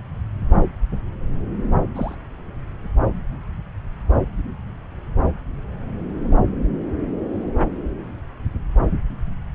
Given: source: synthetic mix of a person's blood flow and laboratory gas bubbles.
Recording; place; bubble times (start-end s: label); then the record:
Doppler ultrasound of blood flow; subclavian vein
1.96-2.15 s: bubbles
From the record:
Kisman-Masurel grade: 112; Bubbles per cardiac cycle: 1 to 2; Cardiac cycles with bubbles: 1 to 10%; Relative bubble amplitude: moderate (0.250 to 0.450); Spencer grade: 1 (occasional bubble signal discernible with the cardiac motion signal, with majority of cardiac periods free of bubbles); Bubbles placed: anywhere in the cardiac cycle